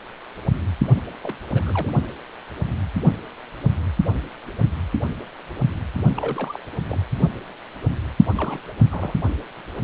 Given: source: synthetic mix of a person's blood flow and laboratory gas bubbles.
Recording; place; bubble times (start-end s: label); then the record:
Doppler ultrasound of blood flow; precordium
1.23-1.35 s: bubbles
1.52-1.92 s: bubbles
6.17-6.59 s: bubbles
6.90-7.00 s: bubbles
8.37-8.62 s: bubbles
8.91-9.12 s: bubbles
From the record:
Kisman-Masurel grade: 221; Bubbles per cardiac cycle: several, 3 to 8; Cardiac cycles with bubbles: 10 to 50%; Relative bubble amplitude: barely perceptible (0.100 to 0.250); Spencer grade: 2 (many but less than half of the cardiac periods contain bubble signals, singularly or in groups); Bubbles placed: only in the low amplitude regions of the cardiac cycle